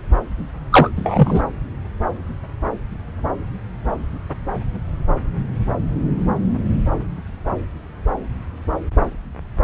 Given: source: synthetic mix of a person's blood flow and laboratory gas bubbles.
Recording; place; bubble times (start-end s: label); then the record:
Doppler ultrasound of blood flow; subclavian vein
0.72-0.90 s: bubbles
0.96-1.42 s: bubbles
From the record:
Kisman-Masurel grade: 213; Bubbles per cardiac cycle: several, 3 to 8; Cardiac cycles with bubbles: 1 to 10%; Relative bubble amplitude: loud (0.450 to 0.775); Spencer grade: 1 (occasional bubble signal discernible with the cardiac motion signal, with majority of cardiac periods free of bubbles); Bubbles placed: anywhere in the cardiac cycle